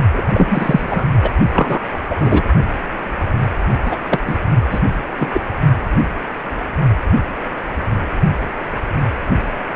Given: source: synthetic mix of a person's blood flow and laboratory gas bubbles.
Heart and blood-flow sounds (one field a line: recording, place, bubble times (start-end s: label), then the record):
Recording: Doppler ultrasound of blood flow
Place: precordium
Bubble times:
0.13-0.24 s: bubbles
0.34-1.04 s: bubbles
1.23-1.31 s: bubbles
1.52-1.79 s: bubbles
2.10-2.16 s: bubbles
2.21-2.43 s: bubbles
3.85-3.99 s: bubbles
4.09-4.21 s: bubbles
4.26-4.36 s: bubbles
4.71-4.79 s: bubbles
5.20-5.30 s: bubbles
5.33-5.41 s: bubbles
From the record:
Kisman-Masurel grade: 223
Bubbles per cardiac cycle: several, 3 to 8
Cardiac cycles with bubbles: 10 to 50%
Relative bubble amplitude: loud (0.450 to 0.775)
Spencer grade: 2 (many but less than half of the cardiac periods contain bubble signals, singularly or in groups)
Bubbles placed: only in the low amplitude regions of the cardiac cycle